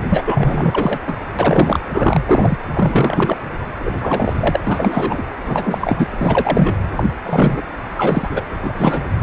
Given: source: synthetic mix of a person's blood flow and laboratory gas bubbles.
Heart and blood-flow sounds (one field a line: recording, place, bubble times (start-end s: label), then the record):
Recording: Doppler ultrasound of blood flow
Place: precordium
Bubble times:
0.10-0.23 s: bubbles
0.26-0.98 s: bubbles
1.06-1.16 s: bubbles
1.39-1.79 s: bubbles
1.93-2.23 s: bubbles
2.27-2.58 s: bubbles
2.74-3.38 s: bubbles
3.79-4.33 s: bubbles
4.38-4.62 s: bubbles
4.67-5.22 s: bubbles
5.45-5.78 s: bubbles
5.81-6.08 s: bubbles
6.11-6.75 s: bubbles
6.96-7.04 s: bubbles
7.22-7.61 s: bubbles
7.96-8.43 s: bubbles
8.64-9.07 s: bubbles
9.20-9.23 s: bubbles
From the record:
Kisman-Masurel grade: 343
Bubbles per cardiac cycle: rolling drumbeat, 9 or more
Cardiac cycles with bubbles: 100%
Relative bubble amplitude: loud (0.450 to 0.775)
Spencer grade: 3 (all of the cardiac periods contain showers or single bubble signals, but not dominating or overriding the cardiac motion signals)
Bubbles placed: anywhere in the cardiac cycle